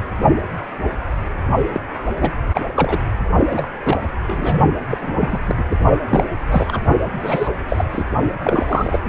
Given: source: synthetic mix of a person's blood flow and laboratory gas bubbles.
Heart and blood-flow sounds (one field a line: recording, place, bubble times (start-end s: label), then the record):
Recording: Doppler ultrasound of blood flow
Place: precordium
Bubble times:
1.72-1.80 s: bubbles
2.20-2.33 s: bubbles
2.53-2.61 s: bubbles
2.74-3.03 s: bubbles
3.50-3.69 s: bubbles
3.83-3.97 s: bubbles
4.26-4.59 s: bubbles
4.90-4.97 s: bubbles
5.01-5.39 s: bubbles
5.47-5.63 s: bubbles
5.71-5.79 s: bubbles
6.08-6.24 s: bubbles
6.49-6.79 s: bubbles
7.19-7.49 s: bubbles
7.68-7.85 s: bubbles
7.92-8.04 s: bubbles
8.45-9.00 s: bubbles
From the record:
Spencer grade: 3 (all of the cardiac periods contain showers or single bubble signals, but not dominating or overriding the cardiac motion signals)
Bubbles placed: only in the low amplitude regions of the cardiac cycle